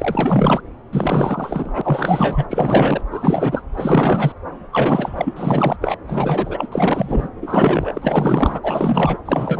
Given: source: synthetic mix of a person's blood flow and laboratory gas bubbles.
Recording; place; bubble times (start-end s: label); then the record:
Doppler ultrasound of blood flow; subclavian vein
0.00-0.61 s: bubbles
0.92-3.07 s: bubbles
3.10-3.62 s: bubbles
3.72-4.32 s: bubbles
4.71-5.76 s: bubbles
5.81-5.97 s: bubbles
6.06-6.67 s: bubbles
6.71-7.29 s: bubbles
7.42-8.60 s: bubbles
8.62-9.18 s: bubbles
9.25-9.60 s: bubbles
From the record:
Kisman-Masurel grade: 444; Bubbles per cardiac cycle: continuous sound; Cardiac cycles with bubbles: 100%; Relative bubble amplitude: maximal (0.775 to 0.999); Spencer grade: 4 (maximum detectable bubble signal sounding continuously throughout systole and diastole of every cardiac period, and overriding the amplitude of the normal cardiac signals); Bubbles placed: anywhere in the cardiac cycle